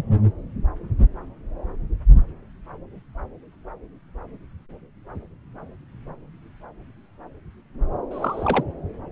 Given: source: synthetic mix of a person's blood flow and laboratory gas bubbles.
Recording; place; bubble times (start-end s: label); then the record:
Doppler ultrasound of blood flow; subclavian vein
8.11-8.63 s: bubbles
From the record:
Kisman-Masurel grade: 112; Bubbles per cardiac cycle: 1 to 2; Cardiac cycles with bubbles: 1 to 10%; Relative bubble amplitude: moderate (0.250 to 0.450); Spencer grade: 1 (occasional bubble signal discernible with the cardiac motion signal, with majority of cardiac periods free of bubbles); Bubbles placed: anywhere in the cardiac cycle